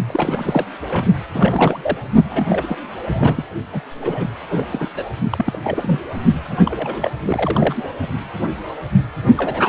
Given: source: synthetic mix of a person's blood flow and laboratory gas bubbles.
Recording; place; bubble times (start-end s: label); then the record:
Doppler ultrasound of blood flow; precordium
0.07-0.66 s: bubbles
0.90-1.05 s: bubbles
1.33-1.97 s: bubbles
2.24-2.46 s: bubbles
2.49-2.77 s: bubbles
3.05-3.44 s: bubbles
3.73-3.80 s: bubbles
4.01-4.26 s: bubbles
4.49-4.65 s: bubbles
4.72-4.90 s: bubbles
4.96-5.03 s: bubbles
5.32-5.58 s: bubbles
5.63-6.00 s: bubbles
6.49-6.58 s: bubbles
6.66-7.11 s: bubbles
7.26-7.75 s: bubbles
7.77-7.88 s: bubbles
9.37-9.69 s: bubbles
From the record:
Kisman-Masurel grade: 332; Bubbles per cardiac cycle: rolling drumbeat, 9 or more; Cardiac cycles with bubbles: 50 to 99%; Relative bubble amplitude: moderate (0.250 to 0.450); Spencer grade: 3 (all of the cardiac periods contain showers or single bubble signals, but not dominating or overriding the cardiac motion signals); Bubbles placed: only in the low amplitude regions of the cardiac cycle